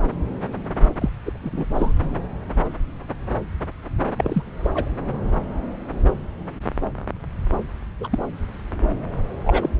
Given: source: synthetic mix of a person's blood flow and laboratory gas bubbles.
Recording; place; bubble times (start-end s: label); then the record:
Doppler ultrasound of blood flow; subclavian vein
1.00-1.09 s: bubbles
1.26-1.32 s: bubbles
1.43-1.65 s: bubbles
1.74-1.93 s: bubbles
4.17-4.42 s: bubbles
4.63-4.71 s: bubbles
4.75-4.88 s: bubbles
8.00-8.08 s: bubbles
8.12-8.18 s: bubbles
9.44-9.70 s: bubbles
9.78-9.80 s: bubbles
From the record:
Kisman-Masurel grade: 222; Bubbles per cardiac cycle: several, 3 to 8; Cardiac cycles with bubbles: 10 to 50%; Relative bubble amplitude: moderate (0.250 to 0.450); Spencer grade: 2 (many but less than half of the cardiac periods contain bubble signals, singularly or in groups); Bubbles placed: anywhere in the cardiac cycle